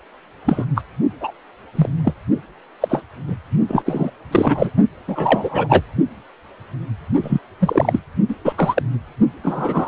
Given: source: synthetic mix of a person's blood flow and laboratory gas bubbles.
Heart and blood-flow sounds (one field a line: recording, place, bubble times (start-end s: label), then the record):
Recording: Doppler ultrasound of blood flow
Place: precordium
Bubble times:
0.45-0.65 s: bubbles
0.75-0.81 s: bubbles
1.20-1.31 s: bubbles
1.75-1.89 s: bubbles
2.04-2.14 s: bubbles
2.81-3.03 s: bubbles
3.27-3.36 s: bubbles
3.67-3.83 s: bubbles
3.85-4.11 s: bubbles
4.31-4.71 s: bubbles
5.08-5.84 s: bubbles
7.22-7.39 s: bubbles
7.60-8.00 s: bubbles
8.28-8.34 s: bubbles
8.45-8.53 s: bubbles
8.56-8.83 s: bubbles
9.42-9.88 s: bubbles
From the record:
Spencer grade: 3 (all of the cardiac periods contain showers or single bubble signals, but not dominating or overriding the cardiac motion signals)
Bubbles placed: only in the low amplitude regions of the cardiac cycle